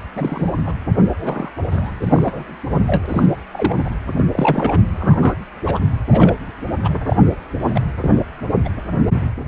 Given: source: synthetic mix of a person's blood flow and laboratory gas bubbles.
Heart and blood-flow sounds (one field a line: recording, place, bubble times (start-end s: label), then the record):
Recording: Doppler ultrasound of blood flow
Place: precordium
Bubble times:
0.15-0.51 s: bubbles
0.66-0.74 s: bubbles
1.05-1.15 s: bubbles
1.17-1.51 s: bubbles
1.71-1.91 s: bubbles
2.02-2.55 s: bubbles
2.70-2.77 s: bubbles
2.87-3.06 s: bubbles
3.08-3.25 s: bubbles
3.52-3.90 s: bubbles
4.17-4.24 s: bubbles
4.32-4.81 s: bubbles
4.99-5.34 s: bubbles
5.66-5.79 s: bubbles
6.12-6.36 s: bubbles
6.84-6.89 s: bubbles
7.07-7.16 s: bubbles
7.61-7.81 s: bubbles
8.02-8.19 s: bubbles
8.54-8.69 s: bubbles
From the record:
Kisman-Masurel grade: 242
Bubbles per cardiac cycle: several, 3 to 8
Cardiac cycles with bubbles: 100%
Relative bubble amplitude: moderate (0.250 to 0.450)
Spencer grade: 3 (all of the cardiac periods contain showers or single bubble signals, but not dominating or overriding the cardiac motion signals)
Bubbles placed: anywhere in the cardiac cycle